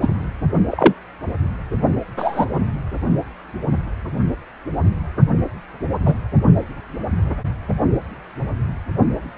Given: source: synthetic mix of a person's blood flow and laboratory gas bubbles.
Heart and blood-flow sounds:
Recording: Doppler ultrasound of blood flow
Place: precordium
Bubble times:
0.01-0.29 s: bubbles
0.70-0.93 s: bubbles
2.17-2.46 s: bubbles
6.06-6.14 s: bubbles
From the record:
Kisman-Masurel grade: 123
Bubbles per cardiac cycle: 1 to 2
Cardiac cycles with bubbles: 10 to 50%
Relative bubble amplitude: loud (0.450 to 0.775)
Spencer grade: 2 (many but less than half of the cardiac periods contain bubble signals, singularly or in groups)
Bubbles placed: only in the low amplitude regions of the cardiac cycle

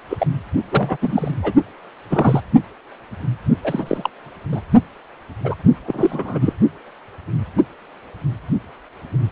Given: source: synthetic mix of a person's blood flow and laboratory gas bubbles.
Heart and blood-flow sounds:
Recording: Doppler ultrasound of blood flow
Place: precordium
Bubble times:
0.10-0.27 s: bubbles
0.71-0.97 s: bubbles
1.01-1.31 s: bubbles
1.42-1.52 s: bubbles
2.10-2.41 s: bubbles
3.62-4.09 s: bubbles
4.52-4.59 s: bubbles
5.44-5.54 s: bubbles
5.85-6.54 s: bubbles
From the record:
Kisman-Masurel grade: 232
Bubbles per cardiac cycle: several, 3 to 8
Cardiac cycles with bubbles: 50 to 99%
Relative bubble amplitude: moderate (0.250 to 0.450)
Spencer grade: 3 (all of the cardiac periods contain showers or single bubble signals, but not dominating or overriding the cardiac motion signals)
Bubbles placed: only in the low amplitude regions of the cardiac cycle

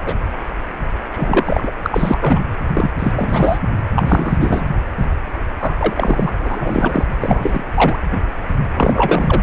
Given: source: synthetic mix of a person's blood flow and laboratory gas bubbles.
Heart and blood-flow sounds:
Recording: Doppler ultrasound of blood flow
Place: precordium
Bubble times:
0.03-0.14 s: bubbles
1.11-1.71 s: bubbles
1.82-2.19 s: bubbles
2.21-2.40 s: bubbles
2.73-2.91 s: bubbles
2.98-3.58 s: bubbles
3.95-4.62 s: bubbles
5.59-5.94 s: bubbles
5.96-6.33 s: bubbles
6.39-7.05 s: bubbles
7.20-7.63 s: bubbles
7.75-7.99 s: bubbles
8.73-9.41 s: bubbles
From the record:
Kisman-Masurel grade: 333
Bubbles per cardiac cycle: rolling drumbeat, 9 or more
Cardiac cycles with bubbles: 50 to 99%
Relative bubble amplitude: loud (0.450 to 0.775)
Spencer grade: 3 (all of the cardiac periods contain showers or single bubble signals, but not dominating or overriding the cardiac motion signals)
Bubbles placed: anywhere in the cardiac cycle

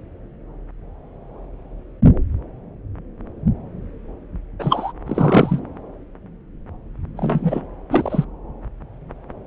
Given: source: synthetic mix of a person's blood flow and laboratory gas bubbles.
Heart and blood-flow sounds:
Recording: Doppler ultrasound of blood flow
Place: subclavian vein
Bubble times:
4.59-4.93 s: bubbles
5.06-5.60 s: bubbles
7.16-7.62 s: bubbles
7.91-8.25 s: bubbles
From the record:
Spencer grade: 2 (many but less than half of the cardiac periods contain bubble signals, singularly or in groups)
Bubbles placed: anywhere in the cardiac cycle

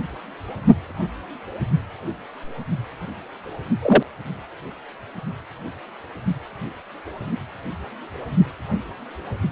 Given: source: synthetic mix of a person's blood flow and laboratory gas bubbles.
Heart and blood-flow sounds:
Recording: Doppler ultrasound of blood flow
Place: precordium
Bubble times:
3.82-4.03 s: bubbles
From the record:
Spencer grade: 1 (occasional bubble signal discernible with the cardiac motion signal, with majority of cardiac periods free of bubbles)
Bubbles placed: only in the low amplitude regions of the cardiac cycle

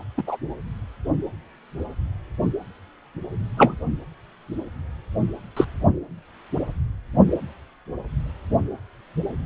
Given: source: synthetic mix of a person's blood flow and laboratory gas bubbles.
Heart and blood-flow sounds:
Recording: Doppler ultrasound of blood flow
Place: precordium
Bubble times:
0.17-0.23 s: bubbles
0.27-0.37 s: bubbles
3.56-3.78 s: bubbles
5.57-5.65 s: bubbles
From the record:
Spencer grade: 2 (many but less than half of the cardiac periods contain bubble signals, singularly or in groups)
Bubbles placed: anywhere in the cardiac cycle

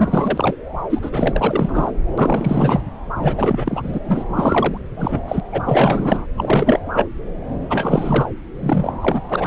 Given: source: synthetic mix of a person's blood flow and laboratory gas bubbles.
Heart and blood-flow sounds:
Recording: Doppler ultrasound of blood flow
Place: subclavian vein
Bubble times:
0.00-0.55 s: bubbles
0.90-1.93 s: bubbles
2.18-2.81 s: bubbles
3.16-3.99 s: bubbles
4.03-4.24 s: bubbles
4.35-4.77 s: bubbles
4.96-5.19 s: bubbles
5.27-5.40 s: bubbles
5.51-6.26 s: bubbles
6.37-6.80 s: bubbles
6.94-7.06 s: bubbles
7.69-8.29 s: bubbles
8.60-8.93 s: bubbles
9.01-9.21 s: bubbles
9.29-9.47 s: bubbles
From the record:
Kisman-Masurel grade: 444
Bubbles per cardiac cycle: continuous sound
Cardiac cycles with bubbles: 100%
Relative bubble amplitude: maximal (0.775 to 0.999)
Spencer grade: 4 (maximum detectable bubble signal sounding continuously throughout systole and diastole of every cardiac period, and overriding the amplitude of the normal cardiac signals)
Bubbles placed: anywhere in the cardiac cycle

